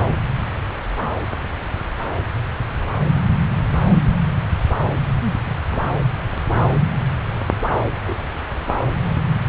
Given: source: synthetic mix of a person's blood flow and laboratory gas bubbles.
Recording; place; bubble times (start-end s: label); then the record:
Doppler ultrasound of blood flow; subclavian vein
4.87-5.00 s: bubbles
5.46-5.56 s: bubbles
5.68-5.84 s: bubbles
5.87-5.96 s: bubbles
8.05-8.30 s: bubbles
From the record:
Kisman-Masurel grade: 121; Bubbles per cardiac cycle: 1 to 2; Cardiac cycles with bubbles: 10 to 50%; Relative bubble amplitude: barely perceptible (0.100 to 0.250); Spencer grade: 2 (many but less than half of the cardiac periods contain bubble signals, singularly or in groups); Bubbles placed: anywhere in the cardiac cycle